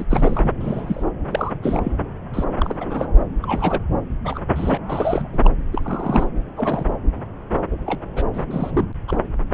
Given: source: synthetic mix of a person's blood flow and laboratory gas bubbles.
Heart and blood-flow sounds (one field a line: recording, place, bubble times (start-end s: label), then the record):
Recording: Doppler ultrasound of blood flow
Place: subclavian vein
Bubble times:
0.00-0.05 s: bubbles
0.10-0.53 s: bubbles
0.60-1.03 s: bubbles
1.31-1.52 s: bubbles
1.62-1.93 s: bubbles
2.33-2.44 s: bubbles
2.58-2.75 s: bubbles
2.79-3.08 s: bubbles
3.42-3.83 s: bubbles
4.25-4.39 s: bubbles
4.56-4.79 s: bubbles
4.87-5.50 s: bubbles
5.72-6.26 s: bubbles
6.57-6.86 s: bubbles
7.50-7.61 s: bubbles
7.86-8.01 s: bubbles
8.15-8.22 s: bubbles
8.33-8.45 s: bubbles
8.50-8.71 s: bubbles
8.74-8.85 s: bubbles
9.07-9.17 s: bubbles
From the record:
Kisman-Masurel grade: 232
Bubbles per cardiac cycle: several, 3 to 8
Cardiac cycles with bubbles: 50 to 99%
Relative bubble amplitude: moderate (0.250 to 0.450)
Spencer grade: 3 (all of the cardiac periods contain showers or single bubble signals, but not dominating or overriding the cardiac motion signals)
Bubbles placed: anywhere in the cardiac cycle